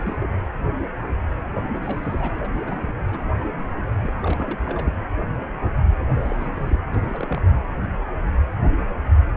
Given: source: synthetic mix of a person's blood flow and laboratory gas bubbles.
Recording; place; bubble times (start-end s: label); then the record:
Doppler ultrasound of blood flow; precordium
0.00-0.16 s: bubbles
0.21-0.28 s: bubbles
1.53-1.72 s: bubbles
1.74-1.80 s: bubbles
1.82-2.48 s: bubbles
2.66-2.93 s: bubbles
3.11-3.31 s: bubbles
3.40-3.44 s: bubbles
3.52-3.62 s: bubbles
4.02-5.07 s: bubbles
5.97-6.79 s: bubbles
6.93-7.42 s: bubbles
From the record:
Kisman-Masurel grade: 221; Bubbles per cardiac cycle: several, 3 to 8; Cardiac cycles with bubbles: 10 to 50%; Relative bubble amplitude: barely perceptible (0.100 to 0.250); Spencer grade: 2 (many but less than half of the cardiac periods contain bubble signals, singularly or in groups); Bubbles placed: anywhere in the cardiac cycle